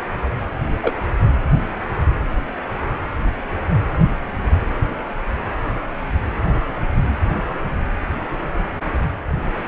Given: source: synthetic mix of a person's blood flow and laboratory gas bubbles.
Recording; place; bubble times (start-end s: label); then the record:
Doppler ultrasound of blood flow; precordium
0.82-0.94 s: bubbles
From the record:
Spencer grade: 1 (occasional bubble signal discernible with the cardiac motion signal, with majority of cardiac periods free of bubbles); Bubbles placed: anywhere in the cardiac cycle